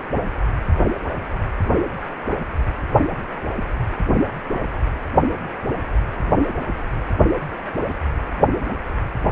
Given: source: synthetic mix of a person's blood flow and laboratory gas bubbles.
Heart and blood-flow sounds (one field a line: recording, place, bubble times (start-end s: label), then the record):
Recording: Doppler ultrasound of blood flow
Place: precordium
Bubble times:
no bubbles
From the record:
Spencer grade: 0 (complete lack of bubble signals)